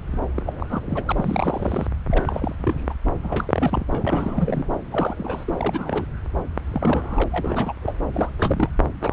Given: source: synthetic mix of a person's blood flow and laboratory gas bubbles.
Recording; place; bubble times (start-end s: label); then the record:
Doppler ultrasound of blood flow; subclavian vein
0.36-0.43 s: bubbles
0.46-0.53 s: bubbles
0.60-0.66 s: bubbles
0.69-0.81 s: bubbles
0.86-1.03 s: bubbles
1.05-1.12 s: bubbles
1.16-1.87 s: bubbles
2.10-2.94 s: bubbles
3.05-3.11 s: bubbles
3.23-3.85 s: bubbles
3.90-4.65 s: bubbles
4.91-5.45 s: bubbles
5.47-6.05 s: bubbles
6.70-7.24 s: bubbles
7.31-7.73 s: bubbles
7.82-7.93 s: bubbles
8.13-8.32 s: bubbles
8.38-8.70 s: bubbles
9.00-9.12 s: bubbles
From the record:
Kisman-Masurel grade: 342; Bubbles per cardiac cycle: rolling drumbeat, 9 or more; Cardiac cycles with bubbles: 100%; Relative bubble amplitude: moderate (0.250 to 0.450); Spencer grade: 3 (all of the cardiac periods contain showers or single bubble signals, but not dominating or overriding the cardiac motion signals); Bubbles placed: anywhere in the cardiac cycle